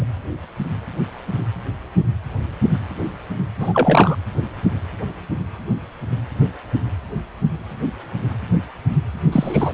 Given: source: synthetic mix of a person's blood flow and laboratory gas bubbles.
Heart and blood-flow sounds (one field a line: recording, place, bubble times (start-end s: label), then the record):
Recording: Doppler ultrasound of blood flow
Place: precordium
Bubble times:
0.00-0.04 s: bubbles
3.60-4.16 s: bubbles
9.31-9.72 s: bubbles
From the record:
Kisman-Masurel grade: 223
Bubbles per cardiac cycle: several, 3 to 8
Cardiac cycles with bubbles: 10 to 50%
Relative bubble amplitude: loud (0.450 to 0.775)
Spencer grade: 2 (many but less than half of the cardiac periods contain bubble signals, singularly or in groups)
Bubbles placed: anywhere in the cardiac cycle